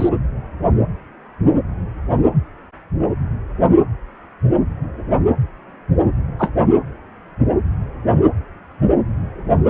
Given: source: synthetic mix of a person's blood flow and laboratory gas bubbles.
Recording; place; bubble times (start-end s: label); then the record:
Doppler ultrasound of blood flow; precordium
0.00-0.09 s: bubbles
6.38-6.51 s: bubbles
From the record:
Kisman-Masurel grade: 123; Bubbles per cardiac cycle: 1 to 2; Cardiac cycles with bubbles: 10 to 50%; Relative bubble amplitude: loud (0.450 to 0.775); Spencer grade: 2 (many but less than half of the cardiac periods contain bubble signals, singularly or in groups); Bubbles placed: anywhere in the cardiac cycle